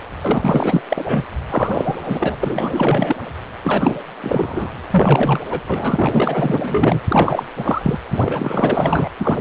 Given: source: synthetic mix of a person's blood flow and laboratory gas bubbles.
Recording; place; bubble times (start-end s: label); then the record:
Doppler ultrasound of blood flow; precordium
0.22-0.82 s: bubbles
0.89-1.27 s: bubbles
1.49-1.97 s: bubbles
2.04-3.16 s: bubbles
3.63-3.96 s: bubbles
4.21-4.71 s: bubbles
4.90-5.40 s: bubbles
5.50-5.62 s: bubbles
5.67-7.01 s: bubbles
7.08-7.43 s: bubbles
7.57-7.99 s: bubbles
8.10-9.08 s: bubbles
9.19-9.41 s: bubbles
From the record:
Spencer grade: 4 (maximum detectable bubble signal sounding continuously throughout systole and diastole of every cardiac period, and overriding the amplitude of the normal cardiac signals); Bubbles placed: anywhere in the cardiac cycle